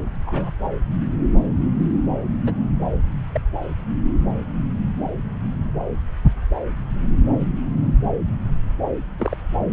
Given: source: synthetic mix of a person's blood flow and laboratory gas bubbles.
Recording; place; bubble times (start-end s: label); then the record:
Doppler ultrasound of blood flow; subclavian vein
0.27-0.53 s: bubbles
2.45-2.53 s: bubbles
3.33-3.41 s: bubbles
9.18-9.37 s: bubbles
From the record:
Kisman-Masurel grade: 121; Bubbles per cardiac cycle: 1 to 2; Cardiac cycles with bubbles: 10 to 50%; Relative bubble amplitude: barely perceptible (0.100 to 0.250); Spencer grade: 2 (many but less than half of the cardiac periods contain bubble signals, singularly or in groups); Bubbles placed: anywhere in the cardiac cycle